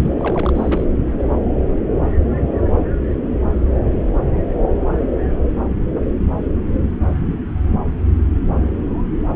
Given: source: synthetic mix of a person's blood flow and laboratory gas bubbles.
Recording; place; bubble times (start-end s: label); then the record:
Doppler ultrasound of blood flow; subclavian vein
0.00-0.14 s: bubbles
0.17-0.85 s: bubbles
From the record:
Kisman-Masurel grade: 211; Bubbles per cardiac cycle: several, 3 to 8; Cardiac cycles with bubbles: 1 to 10%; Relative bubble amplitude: barely perceptible (0.100 to 0.250); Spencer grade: 1 (occasional bubble signal discernible with the cardiac motion signal, with majority of cardiac periods free of bubbles); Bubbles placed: anywhere in the cardiac cycle